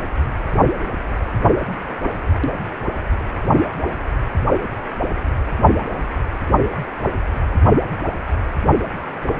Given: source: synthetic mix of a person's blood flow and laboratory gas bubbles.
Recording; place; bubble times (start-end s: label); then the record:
Doppler ultrasound of blood flow; precordium
no bubbles
From the record:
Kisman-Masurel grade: 000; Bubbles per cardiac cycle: 0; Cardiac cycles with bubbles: 0%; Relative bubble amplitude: no bubbles discernible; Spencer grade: 0 (complete lack of bubble signals)